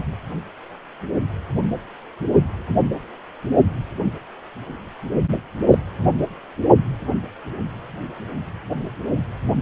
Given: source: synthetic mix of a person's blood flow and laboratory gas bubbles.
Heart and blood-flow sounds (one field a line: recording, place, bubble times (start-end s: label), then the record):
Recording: Doppler ultrasound of blood flow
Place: precordium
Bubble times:
5.70-5.78 s: bubbles
From the record:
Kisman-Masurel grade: 113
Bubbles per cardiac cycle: 1 to 2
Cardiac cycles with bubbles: 1 to 10%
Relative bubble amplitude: loud (0.450 to 0.775)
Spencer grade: 1 (occasional bubble signal discernible with the cardiac motion signal, with majority of cardiac periods free of bubbles)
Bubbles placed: only in the low amplitude regions of the cardiac cycle